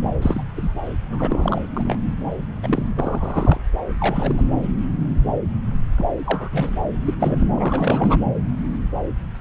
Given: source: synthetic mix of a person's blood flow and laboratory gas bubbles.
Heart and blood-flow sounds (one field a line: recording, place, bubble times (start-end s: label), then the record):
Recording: Doppler ultrasound of blood flow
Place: subclavian vein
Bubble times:
0.22-0.43 s: bubbles
0.55-0.72 s: bubbles
1.11-1.61 s: bubbles
1.74-1.99 s: bubbles
2.62-2.91 s: bubbles
2.99-3.60 s: bubbles
4.00-4.48 s: bubbles
5.98-6.05 s: bubbles
6.24-6.49 s: bubbles
6.52-6.78 s: bubbles
7.04-7.14 s: bubbles
7.20-7.46 s: bubbles
7.55-8.18 s: bubbles
From the record:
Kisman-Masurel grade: 232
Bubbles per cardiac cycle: several, 3 to 8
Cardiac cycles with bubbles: 50 to 99%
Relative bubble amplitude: moderate (0.250 to 0.450)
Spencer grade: 3 (all of the cardiac periods contain showers or single bubble signals, but not dominating or overriding the cardiac motion signals)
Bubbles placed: anywhere in the cardiac cycle